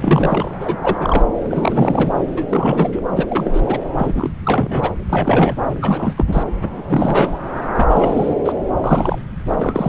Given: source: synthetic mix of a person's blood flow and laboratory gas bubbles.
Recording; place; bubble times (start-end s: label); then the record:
Doppler ultrasound of blood flow; subclavian vein
0.00-0.51 s: bubbles
0.60-0.77 s: bubbles
0.82-1.26 s: bubbles
1.43-2.12 s: bubbles
2.37-2.44 s: bubbles
2.49-3.02 s: bubbles
3.12-3.26 s: bubbles
3.29-3.62 s: bubbles
3.67-3.79 s: bubbles
3.98-4.33 s: bubbles
4.43-4.91 s: bubbles
5.09-5.57 s: bubbles
5.82-6.15 s: bubbles
6.17-6.44 s: bubbles
6.62-6.83 s: bubbles
6.87-7.38 s: bubbles
7.73-7.87 s: bubbles
7.90-8.34 s: bubbles
8.44-8.53 s: bubbles
8.84-9.18 s: bubbles
9.56-9.89 s: bubbles
From the record:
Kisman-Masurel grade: 332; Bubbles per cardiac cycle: rolling drumbeat, 9 or more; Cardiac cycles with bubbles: 50 to 99%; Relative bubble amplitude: moderate (0.250 to 0.450); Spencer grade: 3 (all of the cardiac periods contain showers or single bubble signals, but not dominating or overriding the cardiac motion signals); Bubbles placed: anywhere in the cardiac cycle